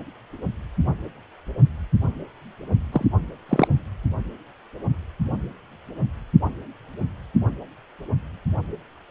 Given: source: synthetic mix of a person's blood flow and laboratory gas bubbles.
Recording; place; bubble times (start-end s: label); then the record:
Doppler ultrasound of blood flow; precordium
2.92-3.05 s: bubbles
3.49-3.67 s: bubbles
From the record:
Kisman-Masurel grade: 213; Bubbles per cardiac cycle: several, 3 to 8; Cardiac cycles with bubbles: 1 to 10%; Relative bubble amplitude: loud (0.450 to 0.775); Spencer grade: 1 (occasional bubble signal discernible with the cardiac motion signal, with majority of cardiac periods free of bubbles); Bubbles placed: only in the low amplitude regions of the cardiac cycle